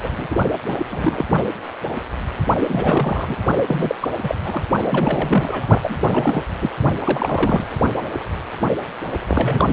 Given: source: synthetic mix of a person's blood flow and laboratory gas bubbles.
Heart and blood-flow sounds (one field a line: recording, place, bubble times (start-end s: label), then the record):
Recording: Doppler ultrasound of blood flow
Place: precordium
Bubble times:
0.03-0.27 s: bubbles
0.31-0.41 s: bubbles
0.66-0.76 s: bubbles
0.90-1.26 s: bubbles
2.58-3.35 s: bubbles
3.67-3.95 s: bubbles
4.00-4.11 s: bubbles
4.22-4.63 s: bubbles
4.81-5.67 s: bubbles
5.81-6.42 s: bubbles
6.61-6.71 s: bubbles
7.04-7.67 s: bubbles
9.27-9.73 s: bubbles
From the record:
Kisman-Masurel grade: 332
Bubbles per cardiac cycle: rolling drumbeat, 9 or more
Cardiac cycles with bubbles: 50 to 99%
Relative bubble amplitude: moderate (0.250 to 0.450)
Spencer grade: 3 (all of the cardiac periods contain showers or single bubble signals, but not dominating or overriding the cardiac motion signals)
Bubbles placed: only in the low amplitude regions of the cardiac cycle